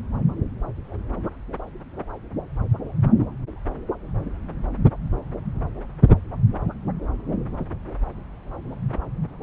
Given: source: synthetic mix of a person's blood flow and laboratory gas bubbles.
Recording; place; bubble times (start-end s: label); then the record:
Doppler ultrasound of blood flow; subclavian vein
no bubbles
From the record:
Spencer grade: 0 (complete lack of bubble signals)